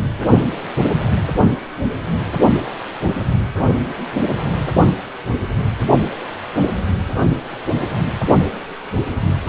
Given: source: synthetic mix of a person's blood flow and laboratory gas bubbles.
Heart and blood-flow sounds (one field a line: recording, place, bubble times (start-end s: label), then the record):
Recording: Doppler ultrasound of blood flow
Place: precordium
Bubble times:
no bubbles
From the record:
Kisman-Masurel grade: 000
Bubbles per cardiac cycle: 0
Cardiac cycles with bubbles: 0%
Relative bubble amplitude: no bubbles discernible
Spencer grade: 0 (complete lack of bubble signals)